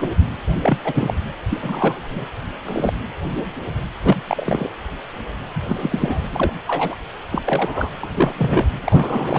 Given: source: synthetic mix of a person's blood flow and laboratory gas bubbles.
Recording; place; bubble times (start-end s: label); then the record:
Doppler ultrasound of blood flow; precordium
0.00-0.08 s: bubbles
0.58-0.78 s: bubbles
0.84-1.13 s: bubbles
1.50-1.60 s: bubbles
1.62-2.06 s: bubbles
2.10-2.27 s: bubbles
2.52-2.56 s: bubbles
2.65-2.93 s: bubbles
4.02-4.22 s: bubbles
4.27-4.70 s: bubbles
5.55-5.62 s: bubbles
5.67-6.27 s: bubbles
6.31-6.53 s: bubbles
6.67-6.96 s: bubbles
7.32-7.42 s: bubbles
7.46-7.90 s: bubbles
8.03-8.33 s: bubbles
8.38-8.65 s: bubbles
8.81-9.39 s: bubbles
From the record:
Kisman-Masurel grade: 232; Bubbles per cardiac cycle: several, 3 to 8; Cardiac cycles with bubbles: 50 to 99%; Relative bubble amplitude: moderate (0.250 to 0.450); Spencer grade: 3 (all of the cardiac periods contain showers or single bubble signals, but not dominating or overriding the cardiac motion signals); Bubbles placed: anywhere in the cardiac cycle